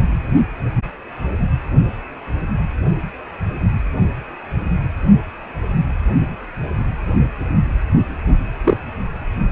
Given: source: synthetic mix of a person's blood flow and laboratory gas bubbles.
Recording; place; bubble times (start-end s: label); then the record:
Doppler ultrasound of blood flow; precordium
8.64-8.77 s: bubbles
From the record:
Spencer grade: 1 (occasional bubble signal discernible with the cardiac motion signal, with majority of cardiac periods free of bubbles); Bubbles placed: anywhere in the cardiac cycle